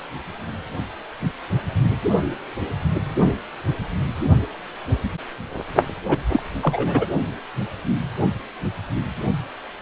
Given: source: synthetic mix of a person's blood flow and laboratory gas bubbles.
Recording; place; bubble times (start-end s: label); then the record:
Doppler ultrasound of blood flow; precordium
6.08-6.18 s: bubbles
6.32-6.42 s: bubbles
6.62-7.07 s: bubbles
From the record:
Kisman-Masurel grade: 212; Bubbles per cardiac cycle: several, 3 to 8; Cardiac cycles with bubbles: 1 to 10%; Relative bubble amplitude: moderate (0.250 to 0.450); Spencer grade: 1 (occasional bubble signal discernible with the cardiac motion signal, with majority of cardiac periods free of bubbles); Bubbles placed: only in the low amplitude regions of the cardiac cycle